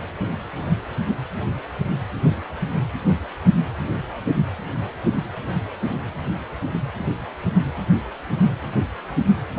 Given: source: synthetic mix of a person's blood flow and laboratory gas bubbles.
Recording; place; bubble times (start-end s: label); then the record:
Doppler ultrasound of blood flow; precordium
9.55-9.59 s: bubbles
From the record:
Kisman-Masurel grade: 213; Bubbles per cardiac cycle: several, 3 to 8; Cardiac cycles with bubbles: 1 to 10%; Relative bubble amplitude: loud (0.450 to 0.775); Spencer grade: 1 (occasional bubble signal discernible with the cardiac motion signal, with majority of cardiac periods free of bubbles); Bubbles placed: anywhere in the cardiac cycle